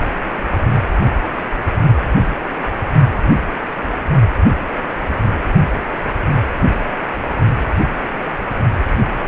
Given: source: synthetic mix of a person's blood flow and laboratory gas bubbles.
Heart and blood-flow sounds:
Doppler ultrasound of blood flow; precordium
no bubbles
From the record:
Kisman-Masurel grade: 000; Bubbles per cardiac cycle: 0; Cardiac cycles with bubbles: 0%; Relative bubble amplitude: no bubbles discernible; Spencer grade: 0 (complete lack of bubble signals)

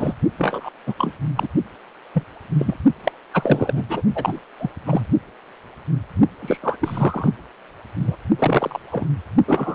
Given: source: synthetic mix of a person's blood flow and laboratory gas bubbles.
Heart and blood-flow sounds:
Doppler ultrasound of blood flow; precordium
0.00-0.14 s: bubbles
0.38-0.70 s: bubbles
0.86-0.94 s: bubbles
0.97-1.13 s: bubbles
1.35-1.48 s: bubbles
2.13-2.25 s: bubbles
2.58-2.75 s: bubbles
3.04-3.12 s: bubbles
3.33-3.85 s: bubbles
3.89-4.03 s: bubbles
4.15-4.41 s: bubbles
4.58-4.71 s: bubbles
4.87-5.01 s: bubbles
6.42-6.58 s: bubbles
6.62-6.77 s: bubbles
6.81-7.29 s: bubbles
7.99-8.16 s: bubbles
8.38-8.79 s: bubbles
8.91-9.07 s: bubbles
9.46-9.75 s: bubbles
From the record:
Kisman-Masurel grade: 233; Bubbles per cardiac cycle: several, 3 to 8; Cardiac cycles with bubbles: 50 to 99%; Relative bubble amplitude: loud (0.450 to 0.775); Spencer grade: 3 (all of the cardiac periods contain showers or single bubble signals, but not dominating or overriding the cardiac motion signals); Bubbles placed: only in the low amplitude regions of the cardiac cycle

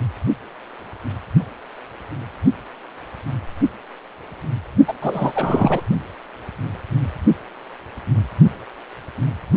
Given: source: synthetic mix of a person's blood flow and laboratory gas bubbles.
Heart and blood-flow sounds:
Doppler ultrasound of blood flow; precordium
4.88-4.94 s: bubbles
5.02-5.81 s: bubbles
From the record:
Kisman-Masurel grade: 213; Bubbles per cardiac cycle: several, 3 to 8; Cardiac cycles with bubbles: 1 to 10%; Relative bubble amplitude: loud (0.450 to 0.775); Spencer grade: 1 (occasional bubble signal discernible with the cardiac motion signal, with majority of cardiac periods free of bubbles); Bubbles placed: only in the low amplitude regions of the cardiac cycle

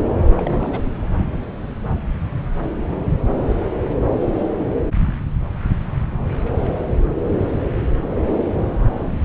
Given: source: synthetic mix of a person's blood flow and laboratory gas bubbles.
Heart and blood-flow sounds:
Doppler ultrasound of blood flow; subclavian vein
0.24-0.80 s: bubbles
0.84-0.92 s: bubbles
From the record:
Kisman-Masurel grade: 211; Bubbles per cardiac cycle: several, 3 to 8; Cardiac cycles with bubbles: 1 to 10%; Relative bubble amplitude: barely perceptible (0.100 to 0.250); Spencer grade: 1 (occasional bubble signal discernible with the cardiac motion signal, with majority of cardiac periods free of bubbles); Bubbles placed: anywhere in the cardiac cycle

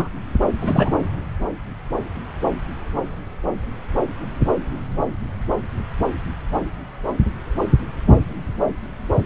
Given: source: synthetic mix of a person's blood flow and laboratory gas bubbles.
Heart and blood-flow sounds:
Doppler ultrasound of blood flow; subclavian vein
0.00-0.09 s: bubbles
0.60-0.90 s: bubbles
From the record:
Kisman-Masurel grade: 213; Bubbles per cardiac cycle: several, 3 to 8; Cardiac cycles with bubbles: 1 to 10%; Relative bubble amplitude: loud (0.450 to 0.775); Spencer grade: 1 (occasional bubble signal discernible with the cardiac motion signal, with majority of cardiac periods free of bubbles); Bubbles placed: anywhere in the cardiac cycle

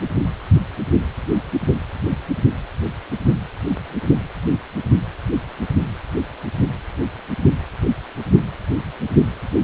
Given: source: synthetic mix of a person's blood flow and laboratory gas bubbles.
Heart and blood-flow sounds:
Doppler ultrasound of blood flow; precordium
no bubbles
From the record:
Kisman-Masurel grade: 000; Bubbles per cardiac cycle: 0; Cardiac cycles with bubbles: 0%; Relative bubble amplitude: no bubbles discernible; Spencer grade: 0 (complete lack of bubble signals)

